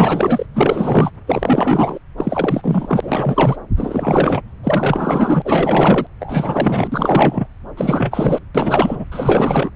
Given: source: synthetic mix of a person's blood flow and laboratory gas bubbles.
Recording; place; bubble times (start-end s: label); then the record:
Doppler ultrasound of blood flow; subclavian vein
0.00-0.46 s: bubbles
0.54-1.10 s: bubbles
1.27-1.99 s: bubbles
2.17-3.56 s: bubbles
3.76-4.42 s: bubbles
4.63-5.42 s: bubbles
5.45-6.07 s: bubbles
6.20-7.48 s: bubbles
7.77-8.39 s: bubbles
8.54-9.04 s: bubbles
9.11-9.70 s: bubbles
From the record:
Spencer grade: 4 (maximum detectable bubble signal sounding continuously throughout systole and diastole of every cardiac period, and overriding the amplitude of the normal cardiac signals); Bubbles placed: anywhere in the cardiac cycle